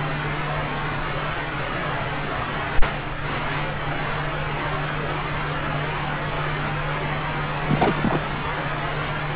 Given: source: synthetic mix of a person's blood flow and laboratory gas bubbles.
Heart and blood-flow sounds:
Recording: Doppler ultrasound of blood flow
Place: subclavian vein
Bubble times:
7.66-8.21 s: bubbles
From the record:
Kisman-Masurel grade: 212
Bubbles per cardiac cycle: several, 3 to 8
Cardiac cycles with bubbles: 1 to 10%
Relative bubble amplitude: moderate (0.250 to 0.450)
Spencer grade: 1 (occasional bubble signal discernible with the cardiac motion signal, with majority of cardiac periods free of bubbles)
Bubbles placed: anywhere in the cardiac cycle

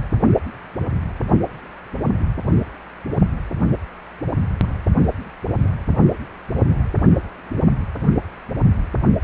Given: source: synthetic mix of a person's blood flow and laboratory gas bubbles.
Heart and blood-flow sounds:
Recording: Doppler ultrasound of blood flow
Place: precordium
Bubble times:
4.63-4.67 s: bubbles
5.54-5.71 s: bubbles
6.72-6.85 s: bubbles
From the record:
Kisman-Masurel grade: 121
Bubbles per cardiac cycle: 1 to 2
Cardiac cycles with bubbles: 10 to 50%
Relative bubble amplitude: barely perceptible (0.100 to 0.250)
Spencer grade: 2 (many but less than half of the cardiac periods contain bubble signals, singularly or in groups)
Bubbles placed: only in the low amplitude regions of the cardiac cycle

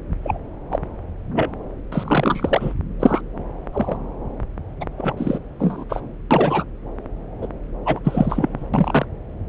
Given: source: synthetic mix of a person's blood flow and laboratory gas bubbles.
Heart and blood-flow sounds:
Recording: Doppler ultrasound of blood flow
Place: subclavian vein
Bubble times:
0.23-0.38 s: bubbles
0.71-0.79 s: bubbles
1.35-1.50 s: bubbles
1.92-2.73 s: bubbles
3.00-3.21 s: bubbles
3.73-3.97 s: bubbles
4.80-4.84 s: bubbles
4.98-5.13 s: bubbles
5.17-5.38 s: bubbles
5.59-5.84 s: bubbles
5.89-6.01 s: bubbles
6.30-6.65 s: bubbles
7.42-7.46 s: bubbles
7.86-7.99 s: bubbles
8.04-8.67 s: bubbles
8.73-9.05 s: bubbles
From the record:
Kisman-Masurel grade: 242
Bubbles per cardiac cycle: several, 3 to 8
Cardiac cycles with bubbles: 100%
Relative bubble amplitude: moderate (0.250 to 0.450)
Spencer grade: 3 (all of the cardiac periods contain showers or single bubble signals, but not dominating or overriding the cardiac motion signals)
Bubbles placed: anywhere in the cardiac cycle

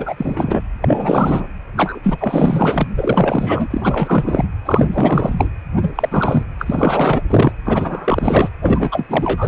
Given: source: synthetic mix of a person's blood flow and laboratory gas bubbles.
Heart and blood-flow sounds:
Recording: Doppler ultrasound of blood flow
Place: precordium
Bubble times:
0.00-0.61 s: bubbles
0.81-1.47 s: bubbles
1.76-2.00 s: bubbles
2.03-2.88 s: bubbles
2.98-3.67 s: bubbles
3.70-4.45 s: bubbles
4.65-5.49 s: bubbles
5.77-6.43 s: bubbles
6.58-7.22 s: bubbles
7.29-7.52 s: bubbles
7.65-8.49 s: bubbles
8.61-9.48 s: bubbles
From the record:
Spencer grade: 4 (maximum detectable bubble signal sounding continuously throughout systole and diastole of every cardiac period, and overriding the amplitude of the normal cardiac signals)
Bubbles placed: anywhere in the cardiac cycle

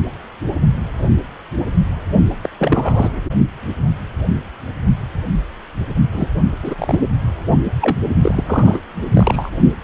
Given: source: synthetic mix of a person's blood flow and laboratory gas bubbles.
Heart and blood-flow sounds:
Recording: Doppler ultrasound of blood flow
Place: precordium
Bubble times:
2.42-2.50 s: bubbles
2.58-3.22 s: bubbles
6.12-6.27 s: bubbles
6.62-6.75 s: bubbles
6.78-7.04 s: bubbles
7.81-7.97 s: bubbles
8.21-8.44 s: bubbles
8.46-8.80 s: bubbles
9.13-9.49 s: bubbles
From the record:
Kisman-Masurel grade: 233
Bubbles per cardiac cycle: several, 3 to 8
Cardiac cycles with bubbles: 50 to 99%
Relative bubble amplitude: loud (0.450 to 0.775)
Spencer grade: 3 (all of the cardiac periods contain showers or single bubble signals, but not dominating or overriding the cardiac motion signals)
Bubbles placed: only in the low amplitude regions of the cardiac cycle

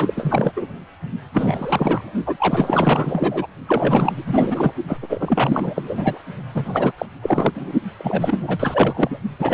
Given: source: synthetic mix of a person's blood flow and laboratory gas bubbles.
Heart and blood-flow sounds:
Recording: Doppler ultrasound of blood flow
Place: precordium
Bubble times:
0.00-0.51 s: bubbles
0.56-0.67 s: bubbles
1.33-2.12 s: bubbles
2.26-2.37 s: bubbles
2.40-3.50 s: bubbles
3.67-4.73 s: bubbles
4.87-4.97 s: bubbles
5.01-6.19 s: bubbles
6.54-6.92 s: bubbles
6.98-7.05 s: bubbles
7.22-7.72 s: bubbles
7.98-9.19 s: bubbles
9.39-9.53 s: bubbles
From the record:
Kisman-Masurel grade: 444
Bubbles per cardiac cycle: continuous sound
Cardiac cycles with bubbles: 100%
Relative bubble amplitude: maximal (0.775 to 0.999)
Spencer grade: 4 (maximum detectable bubble signal sounding continuously throughout systole and diastole of every cardiac period, and overriding the amplitude of the normal cardiac signals)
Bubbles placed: only in the low amplitude regions of the cardiac cycle

